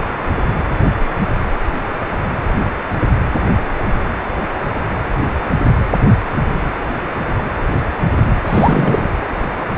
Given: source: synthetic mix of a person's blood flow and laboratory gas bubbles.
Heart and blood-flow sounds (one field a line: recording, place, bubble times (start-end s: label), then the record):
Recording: Doppler ultrasound of blood flow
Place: precordium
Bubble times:
8.46-9.10 s: bubbles
From the record:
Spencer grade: 1 (occasional bubble signal discernible with the cardiac motion signal, with majority of cardiac periods free of bubbles)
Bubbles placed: anywhere in the cardiac cycle